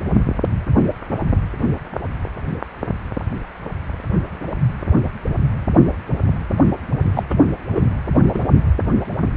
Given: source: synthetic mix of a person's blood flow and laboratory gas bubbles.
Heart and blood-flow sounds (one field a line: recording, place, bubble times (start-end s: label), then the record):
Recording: Doppler ultrasound of blood flow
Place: precordium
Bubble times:
7.13-7.23 s: bubbles
7.30-7.34 s: bubbles
7.75-7.85 s: bubbles
8.34-8.40 s: bubbles
From the record:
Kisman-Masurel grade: 213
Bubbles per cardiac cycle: several, 3 to 8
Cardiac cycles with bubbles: 1 to 10%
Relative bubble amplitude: loud (0.450 to 0.775)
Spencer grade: 1 (occasional bubble signal discernible with the cardiac motion signal, with majority of cardiac periods free of bubbles)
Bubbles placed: only in the low amplitude regions of the cardiac cycle